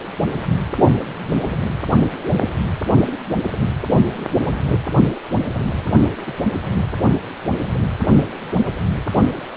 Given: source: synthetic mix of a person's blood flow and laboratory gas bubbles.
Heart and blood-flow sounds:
Doppler ultrasound of blood flow; precordium
6.27-6.34 s: bubbles
6.54-7.02 s: bubbles
From the record:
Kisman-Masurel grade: 111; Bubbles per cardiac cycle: 1 to 2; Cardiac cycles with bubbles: 1 to 10%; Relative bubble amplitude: barely perceptible (0.100 to 0.250); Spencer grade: 1 (occasional bubble signal discernible with the cardiac motion signal, with majority of cardiac periods free of bubbles); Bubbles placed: only in the low amplitude regions of the cardiac cycle

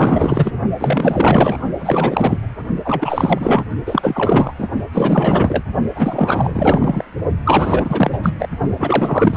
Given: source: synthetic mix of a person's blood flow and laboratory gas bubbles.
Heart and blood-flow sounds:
Doppler ultrasound of blood flow; precordium
0.00-0.53 s: bubbles
0.79-1.60 s: bubbles
1.79-2.38 s: bubbles
2.85-3.63 s: bubbles
3.86-4.54 s: bubbles
4.58-4.69 s: bubbles
4.92-5.63 s: bubbles
5.95-7.04 s: bubbles
7.45-8.19 s: bubbles
8.22-8.34 s: bubbles
8.38-8.49 s: bubbles
8.78-9.37 s: bubbles
From the record:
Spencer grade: 4 (maximum detectable bubble signal sounding continuously throughout systole and diastole of every cardiac period, and overriding the amplitude of the normal cardiac signals); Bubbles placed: only in the low amplitude regions of the cardiac cycle

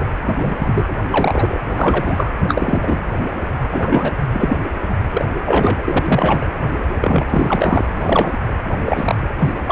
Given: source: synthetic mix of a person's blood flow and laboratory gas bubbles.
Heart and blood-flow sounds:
Doppler ultrasound of blood flow; precordium
0.00-0.06 s: bubbles
0.24-0.95 s: bubbles
1.10-1.60 s: bubbles
1.69-2.33 s: bubbles
2.44-3.00 s: bubbles
3.60-4.11 s: bubbles
4.32-4.59 s: bubbles
5.11-5.25 s: bubbles
5.45-6.03 s: bubbles
6.06-6.50 s: bubbles
6.83-7.25 s: bubbles
7.30-7.88 s: bubbles
7.96-8.41 s: bubbles
8.85-9.29 s: bubbles
9.38-9.54 s: bubbles
9.66-9.72 s: bubbles
From the record:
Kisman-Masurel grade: 243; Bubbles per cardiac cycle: several, 3 to 8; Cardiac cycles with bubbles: 100%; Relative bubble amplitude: loud (0.450 to 0.775); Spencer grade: 3 (all of the cardiac periods contain showers or single bubble signals, but not dominating or overriding the cardiac motion signals); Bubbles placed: anywhere in the cardiac cycle

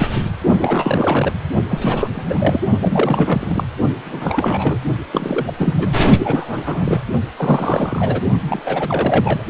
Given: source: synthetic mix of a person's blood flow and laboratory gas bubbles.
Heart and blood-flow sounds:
Doppler ultrasound of blood flow; precordium
0.00-0.08 s: bubbles
0.16-0.24 s: bubbles
0.61-1.32 s: bubbles
1.69-2.08 s: bubbles
2.13-2.61 s: bubbles
2.81-3.65 s: bubbles
4.05-4.79 s: bubbles
5.12-5.54 s: bubbles
5.57-5.93 s: bubbles
6.19-7.01 s: bubbles
7.37-8.21 s: bubbles
8.48-8.62 s: bubbles
8.65-9.42 s: bubbles
From the record:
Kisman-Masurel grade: 342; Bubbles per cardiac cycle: rolling drumbeat, 9 or more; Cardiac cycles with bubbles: 100%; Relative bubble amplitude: moderate (0.250 to 0.450); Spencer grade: 3 (all of the cardiac periods contain showers or single bubble signals, but not dominating or overriding the cardiac motion signals); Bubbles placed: only in the low amplitude regions of the cardiac cycle

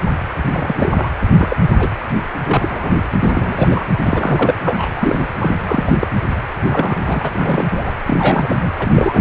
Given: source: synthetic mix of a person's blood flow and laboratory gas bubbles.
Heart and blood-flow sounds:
Doppler ultrasound of blood flow; precordium
0.53-0.93 s: bubbles
0.96-1.10 s: bubbles
1.38-1.56 s: bubbles
1.68-1.76 s: bubbles
1.79-1.88 s: bubbles
2.44-2.92 s: bubbles
3.19-3.85 s: bubbles
4.04-4.54 s: bubbles
4.65-5.20 s: bubbles
5.38-5.55 s: bubbles
5.60-5.93 s: bubbles
6.00-6.07 s: bubbles
6.64-6.97 s: bubbles
7.06-7.31 s: bubbles
7.34-7.66 s: bubbles
7.72-7.92 s: bubbles
8.07-8.71 s: bubbles
8.79-9.21 s: bubbles
From the record:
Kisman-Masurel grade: 242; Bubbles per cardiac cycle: several, 3 to 8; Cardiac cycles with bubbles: 100%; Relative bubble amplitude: moderate (0.250 to 0.450); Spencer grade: 3 (all of the cardiac periods contain showers or single bubble signals, but not dominating or overriding the cardiac motion signals); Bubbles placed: anywhere in the cardiac cycle

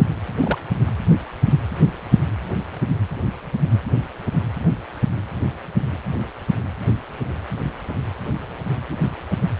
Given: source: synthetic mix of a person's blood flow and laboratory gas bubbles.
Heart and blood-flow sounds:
Doppler ultrasound of blood flow; precordium
0.40-0.58 s: bubbles
From the record:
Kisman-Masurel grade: 122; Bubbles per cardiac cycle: 1 to 2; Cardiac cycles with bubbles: 10 to 50%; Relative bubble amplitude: moderate (0.250 to 0.450); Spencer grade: 2 (many but less than half of the cardiac periods contain bubble signals, singularly or in groups); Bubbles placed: anywhere in the cardiac cycle

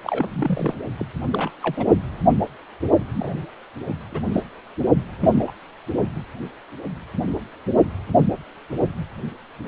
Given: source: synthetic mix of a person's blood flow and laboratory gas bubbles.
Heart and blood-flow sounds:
Doppler ultrasound of blood flow; precordium
0.03-0.29 s: bubbles
0.32-0.74 s: bubbles
0.98-1.05 s: bubbles
1.31-1.50 s: bubbles
1.62-1.85 s: bubbles
3.14-3.46 s: bubbles
3.88-3.95 s: bubbles
4.12-4.21 s: bubbles
4.32-4.42 s: bubbles
5.21-5.45 s: bubbles
5.47-5.51 s: bubbles
From the record:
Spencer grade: 2 (many but less than half of the cardiac periods contain bubble signals, singularly or in groups); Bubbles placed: only in the low amplitude regions of the cardiac cycle

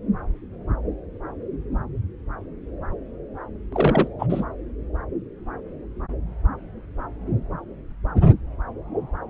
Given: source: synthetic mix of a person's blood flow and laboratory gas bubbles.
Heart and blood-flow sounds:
Doppler ultrasound of blood flow; subclavian vein
3.72-4.08 s: bubbles
4.19-4.26 s: bubbles
4.29-4.45 s: bubbles
From the record:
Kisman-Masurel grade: 212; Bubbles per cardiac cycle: several, 3 to 8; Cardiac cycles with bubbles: 1 to 10%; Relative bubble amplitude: moderate (0.250 to 0.450); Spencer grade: 1 (occasional bubble signal discernible with the cardiac motion signal, with majority of cardiac periods free of bubbles); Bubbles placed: anywhere in the cardiac cycle

